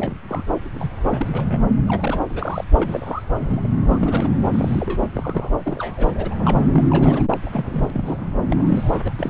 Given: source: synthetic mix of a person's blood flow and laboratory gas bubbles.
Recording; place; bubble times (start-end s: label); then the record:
Doppler ultrasound of blood flow; subclavian vein
0.00-0.15 s: bubbles
0.28-0.43 s: bubbles
0.74-0.90 s: bubbles
1.03-1.27 s: bubbles
1.32-1.60 s: bubbles
1.88-2.21 s: bubbles
2.29-2.64 s: bubbles
2.74-3.23 s: bubbles
3.40-3.68 s: bubbles
3.87-4.29 s: bubbles
4.50-5.07 s: bubbles
5.15-5.50 s: bubbles
5.63-6.11 s: bubbles
6.14-6.36 s: bubbles
6.39-6.65 s: bubbles
6.74-7.23 s: bubbles
7.32-7.38 s: bubbles
7.46-8.31 s: bubbles
8.50-9.13 s: bubbles
9.19-9.30 s: bubbles
From the record:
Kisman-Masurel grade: 242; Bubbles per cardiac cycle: several, 3 to 8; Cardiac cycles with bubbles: 100%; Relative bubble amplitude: moderate (0.250 to 0.450); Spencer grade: 3 (all of the cardiac periods contain showers or single bubble signals, but not dominating or overriding the cardiac motion signals); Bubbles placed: anywhere in the cardiac cycle